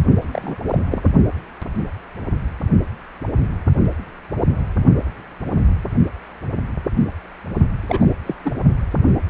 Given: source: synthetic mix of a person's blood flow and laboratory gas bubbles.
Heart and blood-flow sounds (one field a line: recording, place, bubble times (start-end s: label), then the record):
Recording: Doppler ultrasound of blood flow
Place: precordium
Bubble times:
0.22-0.55 s: bubbles
0.66-0.78 s: bubbles
0.90-1.09 s: bubbles
7.82-8.14 s: bubbles
8.27-8.35 s: bubbles
8.44-8.52 s: bubbles
From the record:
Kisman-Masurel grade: 222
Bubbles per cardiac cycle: several, 3 to 8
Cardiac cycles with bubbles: 10 to 50%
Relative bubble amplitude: moderate (0.250 to 0.450)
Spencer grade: 2 (many but less than half of the cardiac periods contain bubble signals, singularly or in groups)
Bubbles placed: only in the low amplitude regions of the cardiac cycle